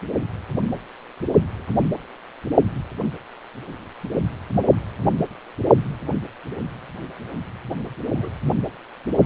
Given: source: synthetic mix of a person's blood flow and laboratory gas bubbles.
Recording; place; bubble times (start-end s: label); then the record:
Doppler ultrasound of blood flow; precordium
8.02-8.29 s: bubbles
8.45-8.53 s: bubbles
From the record:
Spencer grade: 1 (occasional bubble signal discernible with the cardiac motion signal, with majority of cardiac periods free of bubbles); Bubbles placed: anywhere in the cardiac cycle